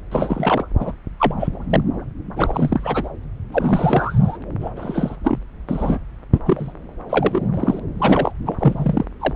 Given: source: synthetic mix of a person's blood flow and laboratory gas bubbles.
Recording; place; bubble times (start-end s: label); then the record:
Doppler ultrasound of blood flow; subclavian vein
0.11-0.64 s: bubbles
0.79-0.92 s: bubbles
1.20-1.34 s: bubbles
1.40-1.47 s: bubbles
1.70-1.80 s: bubbles
2.36-3.09 s: bubbles
3.52-4.38 s: bubbles
4.60-4.71 s: bubbles
4.76-5.16 s: bubbles
5.23-5.39 s: bubbles
5.67-5.98 s: bubbles
6.33-6.39 s: bubbles
6.46-6.72 s: bubbles
7.09-7.50 s: bubbles
7.54-7.79 s: bubbles
7.98-8.32 s: bubbles
8.46-8.55 s: bubbles
8.59-9.05 s: bubbles
9.20-9.34 s: bubbles
From the record:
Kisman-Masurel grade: 232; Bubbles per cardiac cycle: several, 3 to 8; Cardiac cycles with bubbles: 50 to 99%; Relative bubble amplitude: moderate (0.250 to 0.450); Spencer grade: 3 (all of the cardiac periods contain showers or single bubble signals, but not dominating or overriding the cardiac motion signals); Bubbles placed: anywhere in the cardiac cycle